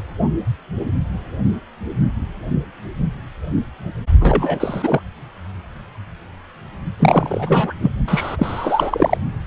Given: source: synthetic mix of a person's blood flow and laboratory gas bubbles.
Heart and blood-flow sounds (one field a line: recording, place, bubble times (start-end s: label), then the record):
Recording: Doppler ultrasound of blood flow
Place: precordium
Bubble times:
4.20-5.03 s: bubbles
7.00-7.73 s: bubbles
7.81-7.91 s: bubbles
8.07-9.17 s: bubbles
From the record:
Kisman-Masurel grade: 223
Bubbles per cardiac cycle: several, 3 to 8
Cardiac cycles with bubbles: 10 to 50%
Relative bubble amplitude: loud (0.450 to 0.775)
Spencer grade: 2 (many but less than half of the cardiac periods contain bubble signals, singularly or in groups)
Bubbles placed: only in the low amplitude regions of the cardiac cycle